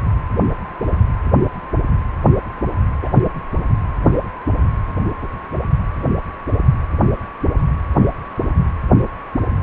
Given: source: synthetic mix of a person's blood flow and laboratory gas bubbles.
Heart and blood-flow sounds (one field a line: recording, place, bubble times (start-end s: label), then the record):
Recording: Doppler ultrasound of blood flow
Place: precordium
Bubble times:
3.01-3.08 s: bubbles
From the record:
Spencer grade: 1 (occasional bubble signal discernible with the cardiac motion signal, with majority of cardiac periods free of bubbles)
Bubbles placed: anywhere in the cardiac cycle